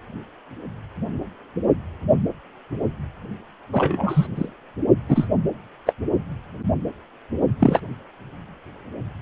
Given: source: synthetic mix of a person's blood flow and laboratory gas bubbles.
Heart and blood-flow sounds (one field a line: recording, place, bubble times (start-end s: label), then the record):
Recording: Doppler ultrasound of blood flow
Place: precordium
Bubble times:
3.72-4.27 s: bubbles
4.35-4.48 s: bubbles
5.08-5.27 s: bubbles
5.86-5.93 s: bubbles
7.60-7.79 s: bubbles
From the record:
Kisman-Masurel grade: 233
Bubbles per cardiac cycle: several, 3 to 8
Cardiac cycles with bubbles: 50 to 99%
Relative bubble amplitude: loud (0.450 to 0.775)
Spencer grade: 3 (all of the cardiac periods contain showers or single bubble signals, but not dominating or overriding the cardiac motion signals)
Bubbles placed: only in the low amplitude regions of the cardiac cycle